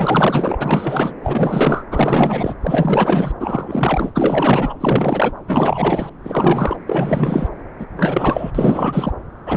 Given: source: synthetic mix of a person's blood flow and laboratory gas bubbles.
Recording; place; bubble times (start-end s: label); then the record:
Doppler ultrasound of blood flow; subclavian vein
0.00-1.14 s: bubbles
1.23-1.84 s: bubbles
1.91-2.54 s: bubbles
2.62-3.31 s: bubbles
3.40-4.11 s: bubbles
4.14-4.75 s: bubbles
4.80-5.32 s: bubbles
5.47-6.10 s: bubbles
6.25-6.77 s: bubbles
6.87-7.49 s: bubbles
7.79-7.85 s: bubbles
7.97-8.51 s: bubbles
8.54-9.12 s: bubbles
9.46-9.57 s: bubbles
From the record:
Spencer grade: 4 (maximum detectable bubble signal sounding continuously throughout systole and diastole of every cardiac period, and overriding the amplitude of the normal cardiac signals); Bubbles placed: anywhere in the cardiac cycle